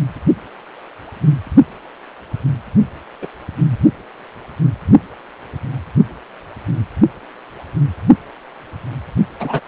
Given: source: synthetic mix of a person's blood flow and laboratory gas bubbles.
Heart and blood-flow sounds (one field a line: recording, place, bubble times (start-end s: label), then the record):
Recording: Doppler ultrasound of blood flow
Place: precordium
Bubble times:
3.22-3.27 s: bubbles
9.39-9.60 s: bubbles
From the record:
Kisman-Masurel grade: 123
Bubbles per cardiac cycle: 1 to 2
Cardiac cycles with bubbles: 10 to 50%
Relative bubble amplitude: loud (0.450 to 0.775)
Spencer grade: 2 (many but less than half of the cardiac periods contain bubble signals, singularly or in groups)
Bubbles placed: only in the low amplitude regions of the cardiac cycle